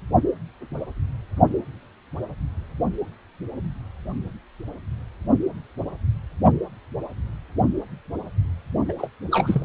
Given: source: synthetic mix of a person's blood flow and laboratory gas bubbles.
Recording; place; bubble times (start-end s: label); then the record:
Doppler ultrasound of blood flow; precordium
8.88-8.93 s: bubbles
8.98-9.10 s: bubbles
9.31-9.64 s: bubbles
From the record:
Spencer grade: 1 (occasional bubble signal discernible with the cardiac motion signal, with majority of cardiac periods free of bubbles); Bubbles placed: only in the low amplitude regions of the cardiac cycle